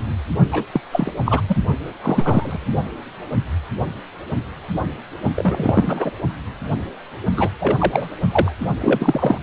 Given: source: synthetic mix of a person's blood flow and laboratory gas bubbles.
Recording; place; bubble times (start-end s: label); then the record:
Doppler ultrasound of blood flow; precordium
0.51-0.64 s: bubbles
0.72-0.81 s: bubbles
0.92-1.11 s: bubbles
1.25-1.41 s: bubbles
1.48-1.56 s: bubbles
2.03-2.67 s: bubbles
5.35-6.12 s: bubbles
7.37-7.49 s: bubbles
7.60-8.08 s: bubbles
8.31-8.52 s: bubbles
8.80-9.38 s: bubbles
From the record:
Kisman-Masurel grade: 233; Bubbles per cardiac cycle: several, 3 to 8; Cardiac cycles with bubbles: 50 to 99%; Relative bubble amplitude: loud (0.450 to 0.775); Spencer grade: 3 (all of the cardiac periods contain showers or single bubble signals, but not dominating or overriding the cardiac motion signals); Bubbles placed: only in the low amplitude regions of the cardiac cycle